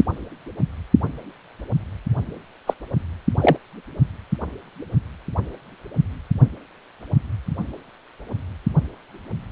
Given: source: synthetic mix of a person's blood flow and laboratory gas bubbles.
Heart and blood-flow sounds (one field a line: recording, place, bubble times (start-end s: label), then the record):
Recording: Doppler ultrasound of blood flow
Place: precordium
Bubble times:
2.67-2.74 s: bubbles
3.40-3.57 s: bubbles
From the record:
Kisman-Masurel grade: 123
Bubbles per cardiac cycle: 1 to 2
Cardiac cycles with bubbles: 10 to 50%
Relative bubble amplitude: loud (0.450 to 0.775)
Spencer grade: 2 (many but less than half of the cardiac periods contain bubble signals, singularly or in groups)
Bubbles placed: only in the low amplitude regions of the cardiac cycle